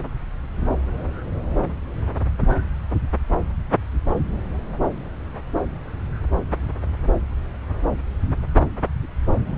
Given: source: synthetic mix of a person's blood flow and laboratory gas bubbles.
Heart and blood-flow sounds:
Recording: Doppler ultrasound of blood flow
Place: subclavian vein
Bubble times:
no bubbles
From the record:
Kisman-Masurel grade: 000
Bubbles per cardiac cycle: 0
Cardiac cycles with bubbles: 0%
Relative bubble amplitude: no bubbles discernible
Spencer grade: 0 (complete lack of bubble signals)

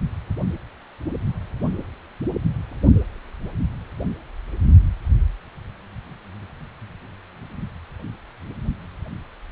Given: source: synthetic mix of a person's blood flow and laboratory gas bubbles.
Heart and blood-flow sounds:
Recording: Doppler ultrasound of blood flow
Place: precordium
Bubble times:
no bubbles
From the record:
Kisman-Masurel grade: 000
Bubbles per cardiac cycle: 0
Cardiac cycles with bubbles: 0%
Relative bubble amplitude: no bubbles discernible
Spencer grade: 0 (complete lack of bubble signals)

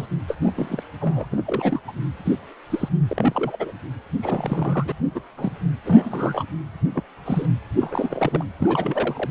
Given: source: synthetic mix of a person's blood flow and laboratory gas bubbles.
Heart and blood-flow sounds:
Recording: Doppler ultrasound of blood flow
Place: precordium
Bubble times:
0.00-0.06 s: bubbles
0.28-0.35 s: bubbles
0.42-0.52 s: bubbles
0.56-0.83 s: bubbles
1.00-1.26 s: bubbles
1.31-1.80 s: bubbles
1.88-1.92 s: bubbles
2.25-2.35 s: bubbles
2.69-2.89 s: bubbles
3.08-3.57 s: bubbles
3.59-3.71 s: bubbles
4.21-4.92 s: bubbles
5.14-5.21 s: bubbles
5.38-5.53 s: bubbles
5.86-6.45 s: bubbles
6.94-7.03 s: bubbles
7.25-7.47 s: bubbles
7.80-8.44 s: bubbles
8.60-9.29 s: bubbles
From the record:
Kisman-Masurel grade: 242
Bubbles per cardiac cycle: several, 3 to 8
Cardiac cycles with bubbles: 100%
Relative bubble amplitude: moderate (0.250 to 0.450)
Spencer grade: 3 (all of the cardiac periods contain showers or single bubble signals, but not dominating or overriding the cardiac motion signals)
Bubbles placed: anywhere in the cardiac cycle

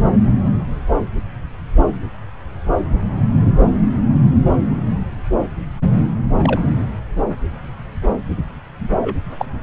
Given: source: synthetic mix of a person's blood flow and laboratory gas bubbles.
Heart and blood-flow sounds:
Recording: Doppler ultrasound of blood flow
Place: subclavian vein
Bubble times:
6.38-6.61 s: bubbles
9.02-9.17 s: bubbles
9.38-9.46 s: bubbles
From the record:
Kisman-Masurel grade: 122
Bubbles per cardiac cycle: 1 to 2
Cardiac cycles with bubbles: 10 to 50%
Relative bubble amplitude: moderate (0.250 to 0.450)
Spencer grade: 2 (many but less than half of the cardiac periods contain bubble signals, singularly or in groups)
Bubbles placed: anywhere in the cardiac cycle

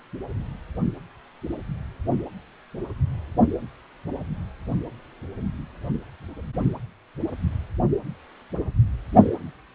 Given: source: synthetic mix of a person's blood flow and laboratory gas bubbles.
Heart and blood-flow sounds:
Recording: Doppler ultrasound of blood flow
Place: precordium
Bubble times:
9.12-9.29 s: bubbles
From the record:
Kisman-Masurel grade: 111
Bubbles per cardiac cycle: 1 to 2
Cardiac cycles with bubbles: 1 to 10%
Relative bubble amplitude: barely perceptible (0.100 to 0.250)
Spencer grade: 1 (occasional bubble signal discernible with the cardiac motion signal, with majority of cardiac periods free of bubbles)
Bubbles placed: anywhere in the cardiac cycle

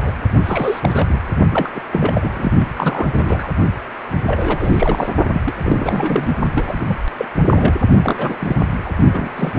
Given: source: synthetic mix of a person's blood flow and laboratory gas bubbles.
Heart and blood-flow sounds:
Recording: Doppler ultrasound of blood flow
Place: precordium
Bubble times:
0.00-0.14 s: bubbles
0.46-1.05 s: bubbles
1.09-1.20 s: bubbles
1.51-1.70 s: bubbles
1.75-1.81 s: bubbles
1.92-2.52 s: bubbles
2.60-2.65 s: bubbles
2.74-3.06 s: bubbles
3.12-3.48 s: bubbles
4.26-5.09 s: bubbles
5.33-5.42 s: bubbles
5.45-6.35 s: bubbles
6.54-6.96 s: bubbles
7.17-7.25 s: bubbles
7.47-7.74 s: bubbles
8.04-8.37 s: bubbles
8.40-8.55 s: bubbles
8.61-8.67 s: bubbles
8.83-8.92 s: bubbles
9.12-9.32 s: bubbles
9.36-9.54 s: bubbles
From the record:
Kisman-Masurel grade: 342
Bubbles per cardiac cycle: rolling drumbeat, 9 or more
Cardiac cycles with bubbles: 100%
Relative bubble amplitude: moderate (0.250 to 0.450)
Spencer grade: 3 (all of the cardiac periods contain showers or single bubble signals, but not dominating or overriding the cardiac motion signals)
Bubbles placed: only in the low amplitude regions of the cardiac cycle

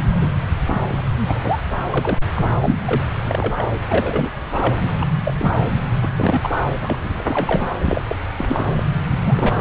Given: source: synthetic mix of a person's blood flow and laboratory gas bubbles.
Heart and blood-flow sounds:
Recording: Doppler ultrasound of blood flow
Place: subclavian vein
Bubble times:
0.12-0.30 s: bubbles
0.66-0.81 s: bubbles
0.89-1.01 s: bubbles
1.25-1.60 s: bubbles
1.90-2.18 s: bubbles
2.35-2.50 s: bubbles
2.61-2.80 s: bubbles
2.85-3.04 s: bubbles
3.23-3.63 s: bubbles
3.88-4.30 s: bubbles
4.54-4.92 s: bubbles
5.01-5.06 s: bubbles
5.26-5.33 s: bubbles
5.38-5.52 s: bubbles
6.02-6.08 s: bubbles
6.18-6.50 s: bubbles
6.83-6.99 s: bubbles
7.03-7.12 s: bubbles
7.19-7.73 s: bubbles
7.82-8.03 s: bubbles
8.09-8.16 s: bubbles
8.38-8.84 s: bubbles
9.04-9.61 s: bubbles
From the record:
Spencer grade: 3 (all of the cardiac periods contain showers or single bubble signals, but not dominating or overriding the cardiac motion signals)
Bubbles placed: anywhere in the cardiac cycle

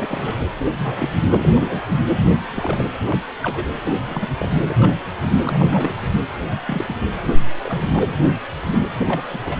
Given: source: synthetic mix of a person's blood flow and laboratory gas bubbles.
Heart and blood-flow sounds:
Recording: Doppler ultrasound of blood flow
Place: precordium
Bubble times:
0.00-0.46 s: bubbles
0.58-0.72 s: bubbles
0.77-1.15 s: bubbles
1.31-1.81 s: bubbles
2.16-2.29 s: bubbles
2.34-2.39 s: bubbles
2.55-2.84 s: bubbles
3.00-3.19 s: bubbles
3.42-3.66 s: bubbles
3.82-3.94 s: bubbles
4.07-4.29 s: bubbles
4.39-4.50 s: bubbles
4.63-4.94 s: bubbles
5.44-5.94 s: bubbles
6.65-6.84 s: bubbles
6.87-6.97 s: bubbles
7.63-8.06 s: bubbles
8.11-8.35 s: bubbles
8.71-8.79 s: bubbles
8.97-9.22 s: bubbles
9.33-9.39 s: bubbles
9.45-9.60 s: bubbles
From the record:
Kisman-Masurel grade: 242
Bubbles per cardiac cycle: several, 3 to 8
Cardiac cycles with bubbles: 100%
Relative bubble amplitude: moderate (0.250 to 0.450)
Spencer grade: 3 (all of the cardiac periods contain showers or single bubble signals, but not dominating or overriding the cardiac motion signals)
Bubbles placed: anywhere in the cardiac cycle

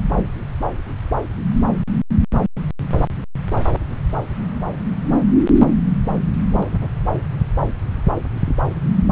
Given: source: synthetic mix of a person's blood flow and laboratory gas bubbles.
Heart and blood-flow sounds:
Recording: Doppler ultrasound of blood flow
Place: subclavian vein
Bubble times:
6.51-6.60 s: bubbles
6.71-6.88 s: bubbles
From the record:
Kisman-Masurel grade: 111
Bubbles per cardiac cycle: 1 to 2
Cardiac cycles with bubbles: 1 to 10%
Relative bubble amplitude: barely perceptible (0.100 to 0.250)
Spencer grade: 1 (occasional bubble signal discernible with the cardiac motion signal, with majority of cardiac periods free of bubbles)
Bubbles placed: anywhere in the cardiac cycle

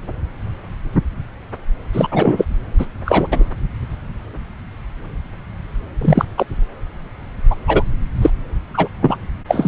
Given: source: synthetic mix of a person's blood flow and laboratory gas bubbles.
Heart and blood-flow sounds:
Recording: Doppler ultrasound of blood flow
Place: subclavian vein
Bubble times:
1.93-2.08 s: bubbles
2.12-2.45 s: bubbles
2.79-2.86 s: bubbles
3.06-3.45 s: bubbles
6.01-6.25 s: bubbles
6.37-6.46 s: bubbles
7.50-7.56 s: bubbles
7.67-7.83 s: bubbles
8.21-8.30 s: bubbles
8.74-8.88 s: bubbles
9.00-9.17 s: bubbles
9.48-9.68 s: bubbles
From the record:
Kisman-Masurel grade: 233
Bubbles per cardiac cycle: several, 3 to 8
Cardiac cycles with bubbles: 50 to 99%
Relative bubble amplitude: loud (0.450 to 0.775)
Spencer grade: 3 (all of the cardiac periods contain showers or single bubble signals, but not dominating or overriding the cardiac motion signals)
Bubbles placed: anywhere in the cardiac cycle

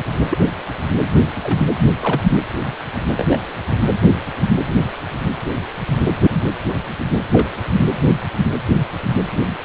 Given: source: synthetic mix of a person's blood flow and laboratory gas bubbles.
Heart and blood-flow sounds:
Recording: Doppler ultrasound of blood flow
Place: precordium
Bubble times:
0.30-0.39 s: bubbles
1.35-1.58 s: bubbles
2.00-2.21 s: bubbles
3.17-3.38 s: bubbles
4.63-4.74 s: bubbles
7.31-7.50 s: bubbles
From the record:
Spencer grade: 2 (many but less than half of the cardiac periods contain bubble signals, singularly or in groups)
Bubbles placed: anywhere in the cardiac cycle

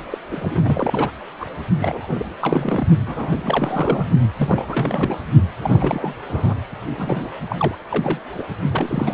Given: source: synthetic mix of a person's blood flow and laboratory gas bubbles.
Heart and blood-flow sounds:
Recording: Doppler ultrasound of blood flow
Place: precordium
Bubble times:
0.10-0.18 s: bubbles
0.31-1.10 s: bubbles
1.40-1.46 s: bubbles
1.79-2.26 s: bubbles
2.41-2.87 s: bubbles
3.06-4.08 s: bubbles
4.38-5.18 s: bubbles
5.61-6.14 s: bubbles
6.29-6.54 s: bubbles
6.97-7.28 s: bubbles
7.46-7.75 s: bubbles
7.90-8.19 s: bubbles
8.38-8.43 s: bubbles
8.72-9.14 s: bubbles
From the record:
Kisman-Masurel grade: 332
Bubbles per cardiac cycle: rolling drumbeat, 9 or more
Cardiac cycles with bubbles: 50 to 99%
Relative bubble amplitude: moderate (0.250 to 0.450)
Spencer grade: 3 (all of the cardiac periods contain showers or single bubble signals, but not dominating or overriding the cardiac motion signals)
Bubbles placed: only in the low amplitude regions of the cardiac cycle

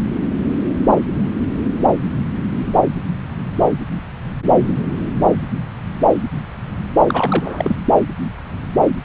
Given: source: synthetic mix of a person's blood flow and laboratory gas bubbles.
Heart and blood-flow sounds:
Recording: Doppler ultrasound of blood flow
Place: subclavian vein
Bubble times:
7.08-7.76 s: bubbles
From the record:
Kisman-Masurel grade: 212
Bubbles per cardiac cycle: several, 3 to 8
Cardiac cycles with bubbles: 1 to 10%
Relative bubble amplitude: moderate (0.250 to 0.450)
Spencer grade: 1 (occasional bubble signal discernible with the cardiac motion signal, with majority of cardiac periods free of bubbles)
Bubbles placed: anywhere in the cardiac cycle

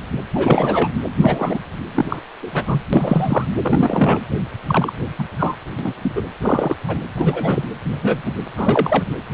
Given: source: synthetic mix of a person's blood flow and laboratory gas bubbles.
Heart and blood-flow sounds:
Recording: Doppler ultrasound of blood flow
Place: precordium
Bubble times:
0.00-0.02 s: bubbles
0.34-0.91 s: bubbles
1.17-1.59 s: bubbles
1.95-2.05 s: bubbles
2.08-2.19 s: bubbles
2.41-2.83 s: bubbles
2.93-3.46 s: bubbles
3.62-4.18 s: bubbles
4.67-4.93 s: bubbles
5.18-5.25 s: bubbles
5.38-5.56 s: bubbles
5.78-5.93 s: bubbles
6.02-6.11 s: bubbles
6.15-6.22 s: bubbles
6.42-6.75 s: bubbles
6.87-7.01 s: bubbles
7.16-7.63 s: bubbles
7.83-8.22 s: bubbles
8.26-8.33 s: bubbles
8.57-9.04 s: bubbles
9.32-9.34 s: bubbles
From the record:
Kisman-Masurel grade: 243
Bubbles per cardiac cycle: several, 3 to 8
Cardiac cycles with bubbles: 100%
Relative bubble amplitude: loud (0.450 to 0.775)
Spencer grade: 3 (all of the cardiac periods contain showers or single bubble signals, but not dominating or overriding the cardiac motion signals)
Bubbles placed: anywhere in the cardiac cycle

